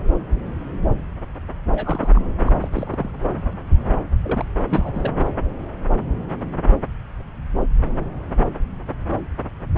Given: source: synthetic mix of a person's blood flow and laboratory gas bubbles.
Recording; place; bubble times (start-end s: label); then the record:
Doppler ultrasound of blood flow; subclavian vein
1.71-2.22 s: bubbles
2.44-2.52 s: bubbles
2.61-2.68 s: bubbles
2.73-3.10 s: bubbles
4.23-4.45 s: bubbles
4.68-5.14 s: bubbles
From the record:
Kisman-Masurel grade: 221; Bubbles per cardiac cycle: several, 3 to 8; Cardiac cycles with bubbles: 10 to 50%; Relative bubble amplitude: barely perceptible (0.100 to 0.250); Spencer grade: 2 (many but less than half of the cardiac periods contain bubble signals, singularly or in groups); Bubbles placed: anywhere in the cardiac cycle